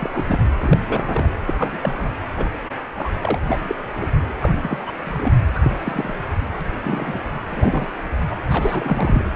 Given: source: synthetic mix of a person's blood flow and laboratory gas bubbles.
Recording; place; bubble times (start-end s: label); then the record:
Doppler ultrasound of blood flow; precordium
0.00-0.11 s: bubbles
0.13-0.24 s: bubbles
0.28-0.39 s: bubbles
0.61-0.80 s: bubbles
0.89-1.33 s: bubbles
1.47-1.55 s: bubbles
1.58-1.78 s: bubbles
1.81-2.10 s: bubbles
2.37-2.46 s: bubbles
2.97-3.11 s: bubbles
3.21-3.39 s: bubbles
3.48-3.58 s: bubbles
3.61-4.08 s: bubbles
4.36-4.95 s: bubbles
5.04-5.38 s: bubbles
5.54-5.59 s: bubbles
5.63-6.15 s: bubbles
6.60-6.64 s: bubbles
6.84-7.20 s: bubbles
7.48-7.89 s: bubbles
8.30-8.37 s: bubbles
8.49-9.25 s: bubbles
From the record:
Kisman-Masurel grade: 242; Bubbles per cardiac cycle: several, 3 to 8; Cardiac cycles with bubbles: 100%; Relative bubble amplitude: moderate (0.250 to 0.450); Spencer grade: 3 (all of the cardiac periods contain showers or single bubble signals, but not dominating or overriding the cardiac motion signals); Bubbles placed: anywhere in the cardiac cycle